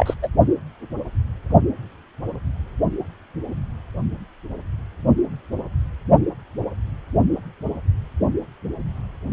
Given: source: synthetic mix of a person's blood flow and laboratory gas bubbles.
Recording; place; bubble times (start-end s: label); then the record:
Doppler ultrasound of blood flow; precordium
0.00-0.14 s: bubbles
0.22-0.29 s: bubbles
From the record:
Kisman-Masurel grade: 223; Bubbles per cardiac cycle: several, 3 to 8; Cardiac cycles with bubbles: 10 to 50%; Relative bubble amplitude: loud (0.450 to 0.775); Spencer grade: 2 (many but less than half of the cardiac periods contain bubble signals, singularly or in groups); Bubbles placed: only in the low amplitude regions of the cardiac cycle